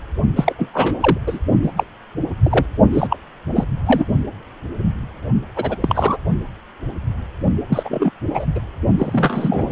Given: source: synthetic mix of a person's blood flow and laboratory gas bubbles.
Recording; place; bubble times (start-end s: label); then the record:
Doppler ultrasound of blood flow; precordium
0.36-0.53 s: bubbles
0.58-1.18 s: bubbles
1.26-1.39 s: bubbles
1.62-1.73 s: bubbles
1.76-1.83 s: bubbles
2.43-2.66 s: bubbles
2.93-3.17 s: bubbles
3.56-3.65 s: bubbles
3.85-4.04 s: bubbles
5.55-5.76 s: bubbles
5.80-6.17 s: bubbles
7.69-8.11 s: bubbles
8.33-8.46 s: bubbles
8.55-8.60 s: bubbles
8.97-9.72 s: bubbles
From the record:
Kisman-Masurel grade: 233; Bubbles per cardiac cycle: several, 3 to 8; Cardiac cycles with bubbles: 50 to 99%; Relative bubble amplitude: loud (0.450 to 0.775); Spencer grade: 3 (all of the cardiac periods contain showers or single bubble signals, but not dominating or overriding the cardiac motion signals); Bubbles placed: only in the low amplitude regions of the cardiac cycle